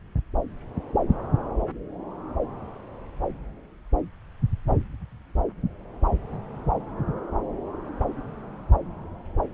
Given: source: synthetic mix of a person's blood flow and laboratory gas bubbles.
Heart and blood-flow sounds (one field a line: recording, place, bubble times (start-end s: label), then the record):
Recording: Doppler ultrasound of blood flow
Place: subclavian vein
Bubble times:
no bubbles
From the record:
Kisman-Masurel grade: 000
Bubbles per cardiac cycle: 0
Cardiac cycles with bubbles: 0%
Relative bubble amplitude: no bubbles discernible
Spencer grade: 0 (complete lack of bubble signals)